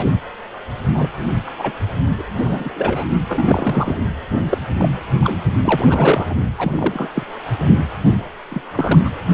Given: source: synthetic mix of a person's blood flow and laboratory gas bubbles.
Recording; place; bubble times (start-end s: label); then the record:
Doppler ultrasound of blood flow; precordium
0.00-0.06 s: bubbles
0.93-1.09 s: bubbles
1.47-1.51 s: bubbles
1.58-1.73 s: bubbles
2.18-2.24 s: bubbles
2.35-2.71 s: bubbles
2.76-3.06 s: bubbles
3.27-4.03 s: bubbles
4.49-4.58 s: bubbles
4.79-4.89 s: bubbles
5.13-5.19 s: bubbles
5.21-5.39 s: bubbles
5.65-6.35 s: bubbles
6.58-7.08 s: bubbles
7.14-7.23 s: bubbles
8.50-8.62 s: bubbles
8.73-8.99 s: bubbles
9.04-9.11 s: bubbles
From the record:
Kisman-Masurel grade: 242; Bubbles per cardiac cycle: several, 3 to 8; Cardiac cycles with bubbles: 100%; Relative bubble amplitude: moderate (0.250 to 0.450); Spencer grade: 3 (all of the cardiac periods contain showers or single bubble signals, but not dominating or overriding the cardiac motion signals); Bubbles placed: anywhere in the cardiac cycle